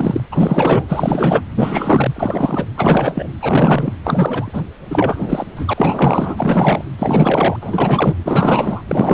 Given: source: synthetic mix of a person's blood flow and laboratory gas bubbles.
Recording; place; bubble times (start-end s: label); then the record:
Doppler ultrasound of blood flow; precordium
0.00-0.20 s: bubbles
0.31-0.85 s: bubbles
0.88-1.42 s: bubbles
1.54-2.13 s: bubbles
2.16-2.66 s: bubbles
2.77-3.29 s: bubbles
3.41-3.93 s: bubbles
4.04-4.62 s: bubbles
4.88-5.46 s: bubbles
5.56-6.92 s: bubbles
6.98-7.57 s: bubbles
7.61-8.15 s: bubbles
8.23-8.83 s: bubbles
8.88-9.14 s: bubbles
From the record:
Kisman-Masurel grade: 444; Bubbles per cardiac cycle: continuous sound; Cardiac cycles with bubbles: 100%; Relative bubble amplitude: maximal (0.775 to 0.999); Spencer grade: 4 (maximum detectable bubble signal sounding continuously throughout systole and diastole of every cardiac period, and overriding the amplitude of the normal cardiac signals); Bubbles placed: anywhere in the cardiac cycle